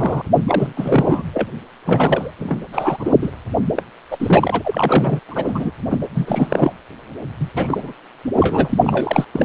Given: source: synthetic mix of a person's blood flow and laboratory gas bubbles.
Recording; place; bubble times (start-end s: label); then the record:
Doppler ultrasound of blood flow; precordium
0.00-0.21 s: bubbles
0.47-1.23 s: bubbles
1.33-1.48 s: bubbles
1.85-2.31 s: bubbles
2.39-2.65 s: bubbles
2.73-3.17 s: bubbles
3.22-3.31 s: bubbles
3.76-3.83 s: bubbles
4.10-5.19 s: bubbles
5.28-5.71 s: bubbles
5.90-5.97 s: bubbles
6.13-6.73 s: bubbles
7.39-7.49 s: bubbles
7.56-7.93 s: bubbles
8.36-9.24 s: bubbles
9.33-9.45 s: bubbles
From the record:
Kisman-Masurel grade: 343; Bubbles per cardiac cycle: rolling drumbeat, 9 or more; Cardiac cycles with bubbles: 100%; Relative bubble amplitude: loud (0.450 to 0.775); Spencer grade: 3 (all of the cardiac periods contain showers or single bubble signals, but not dominating or overriding the cardiac motion signals); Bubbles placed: anywhere in the cardiac cycle